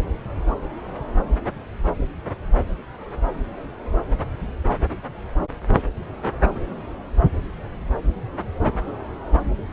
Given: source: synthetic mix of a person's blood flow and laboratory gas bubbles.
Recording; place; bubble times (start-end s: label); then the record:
Doppler ultrasound of blood flow; subclavian vein
no bubbles
From the record:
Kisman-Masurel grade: 000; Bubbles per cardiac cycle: 0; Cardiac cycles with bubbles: 0%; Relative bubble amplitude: no bubbles discernible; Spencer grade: 0 (complete lack of bubble signals)